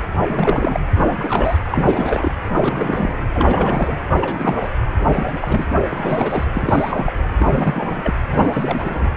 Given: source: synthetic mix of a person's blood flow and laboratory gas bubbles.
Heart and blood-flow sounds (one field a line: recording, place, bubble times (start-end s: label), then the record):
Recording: Doppler ultrasound of blood flow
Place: precordium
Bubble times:
0.27-0.80 s: bubbles
0.97-1.57 s: bubbles
1.71-2.33 s: bubbles
2.50-3.20 s: bubbles
3.33-4.09 s: bubbles
4.14-4.69 s: bubbles
5.01-5.25 s: bubbles
5.27-5.38 s: bubbles
5.41-5.67 s: bubbles
5.90-6.44 s: bubbles
6.53-7.20 s: bubbles
7.40-8.14 s: bubbles
8.29-9.08 s: bubbles
From the record:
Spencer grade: 3 (all of the cardiac periods contain showers or single bubble signals, but not dominating or overriding the cardiac motion signals)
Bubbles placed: anywhere in the cardiac cycle